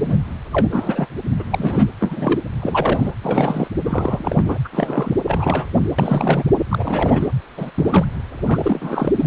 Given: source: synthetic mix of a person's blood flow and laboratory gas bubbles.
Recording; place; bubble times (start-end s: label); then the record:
Doppler ultrasound of blood flow; precordium
0.00-0.18 s: bubbles
0.52-0.68 s: bubbles
0.72-1.07 s: bubbles
1.38-1.44 s: bubbles
1.50-1.86 s: bubbles
2.00-2.51 s: bubbles
2.62-3.13 s: bubbles
3.21-3.68 s: bubbles
3.84-4.58 s: bubbles
4.64-4.68 s: bubbles
4.72-5.13 s: bubbles
5.25-5.67 s: bubbles
5.73-5.80 s: bubbles
5.98-6.44 s: bubbles
6.70-7.28 s: bubbles
7.56-7.71 s: bubbles
7.74-8.05 s: bubbles
8.47-9.27 s: bubbles
From the record:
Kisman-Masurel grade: 343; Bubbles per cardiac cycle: rolling drumbeat, 9 or more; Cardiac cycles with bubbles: 100%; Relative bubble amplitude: loud (0.450 to 0.775); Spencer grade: 3 (all of the cardiac periods contain showers or single bubble signals, but not dominating or overriding the cardiac motion signals); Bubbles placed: anywhere in the cardiac cycle